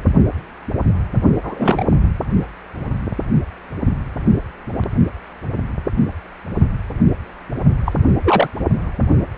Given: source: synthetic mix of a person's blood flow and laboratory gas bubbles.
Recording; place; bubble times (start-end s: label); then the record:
Doppler ultrasound of blood flow; precordium
1.44-1.85 s: bubbles
7.86-7.92 s: bubbles
8.23-8.48 s: bubbles
From the record:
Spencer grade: 2 (many but less than half of the cardiac periods contain bubble signals, singularly or in groups); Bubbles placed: only in the low amplitude regions of the cardiac cycle